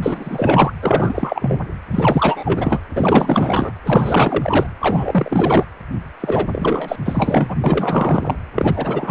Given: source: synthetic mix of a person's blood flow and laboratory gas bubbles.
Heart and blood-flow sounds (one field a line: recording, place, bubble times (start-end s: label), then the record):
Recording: Doppler ultrasound of blood flow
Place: precordium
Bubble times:
0.02-0.72 s: bubbles
0.82-1.61 s: bubbles
1.91-2.82 s: bubbles
2.96-3.71 s: bubbles
3.83-4.67 s: bubbles
4.79-5.65 s: bubbles
6.20-6.96 s: bubbles
7.05-7.57 s: bubbles
7.63-8.36 s: bubbles
8.55-9.11 s: bubbles
From the record:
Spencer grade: 4 (maximum detectable bubble signal sounding continuously throughout systole and diastole of every cardiac period, and overriding the amplitude of the normal cardiac signals)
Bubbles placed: anywhere in the cardiac cycle